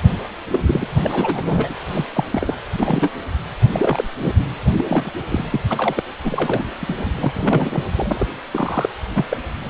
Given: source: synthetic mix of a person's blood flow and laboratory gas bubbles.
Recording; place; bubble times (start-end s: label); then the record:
Doppler ultrasound of blood flow; precordium
0.52-0.60 s: bubbles
0.62-0.88 s: bubbles
0.97-1.74 s: bubbles
1.86-2.05 s: bubbles
2.14-2.27 s: bubbles
2.30-2.56 s: bubbles
2.77-3.10 s: bubbles
3.72-4.04 s: bubbles
4.22-4.33 s: bubbles
4.78-4.84 s: bubbles
4.88-5.12 s: bubbles
5.29-5.45 s: bubbles
5.50-5.60 s: bubbles
5.70-6.03 s: bubbles
6.23-6.64 s: bubbles
6.80-7.12 s: bubbles
7.15-7.83 s: bubbles
7.96-8.26 s: bubbles
8.51-8.89 s: bubbles
9.13-9.25 s: bubbles
9.30-9.37 s: bubbles
9.63-9.69 s: bubbles
From the record:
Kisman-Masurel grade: 242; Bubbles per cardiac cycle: several, 3 to 8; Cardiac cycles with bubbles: 100%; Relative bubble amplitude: moderate (0.250 to 0.450); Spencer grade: 3 (all of the cardiac periods contain showers or single bubble signals, but not dominating or overriding the cardiac motion signals); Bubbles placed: anywhere in the cardiac cycle